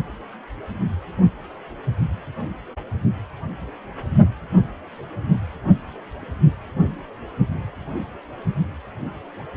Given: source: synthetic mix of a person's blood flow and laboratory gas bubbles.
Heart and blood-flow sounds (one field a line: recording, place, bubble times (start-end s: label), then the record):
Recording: Doppler ultrasound of blood flow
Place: precordium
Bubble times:
no bubbles
From the record:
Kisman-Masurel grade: 000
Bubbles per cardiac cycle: 0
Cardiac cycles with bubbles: 0%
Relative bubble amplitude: no bubbles discernible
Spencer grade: 0 (complete lack of bubble signals)